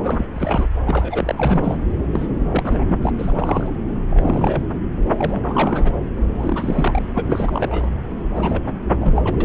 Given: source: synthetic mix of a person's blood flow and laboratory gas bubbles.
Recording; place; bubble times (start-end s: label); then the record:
Doppler ultrasound of blood flow; subclavian vein
0.03-0.25 s: bubbles
0.33-0.68 s: bubbles
0.86-1.80 s: bubbles
2.12-2.28 s: bubbles
2.50-2.84 s: bubbles
2.88-3.10 s: bubbles
3.17-3.76 s: bubbles
4.09-4.63 s: bubbles
5.15-5.95 s: bubbles
6.17-6.19 s: bubbles
6.38-7.02 s: bubbles
7.13-7.89 s: bubbles
8.35-8.62 s: bubbles
8.66-8.71 s: bubbles
9.00-9.36 s: bubbles
9.40-9.44 s: bubbles
From the record:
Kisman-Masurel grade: 342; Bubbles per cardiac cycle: rolling drumbeat, 9 or more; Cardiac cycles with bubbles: 100%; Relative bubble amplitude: moderate (0.250 to 0.450); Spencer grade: 3 (all of the cardiac periods contain showers or single bubble signals, but not dominating or overriding the cardiac motion signals); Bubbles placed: anywhere in the cardiac cycle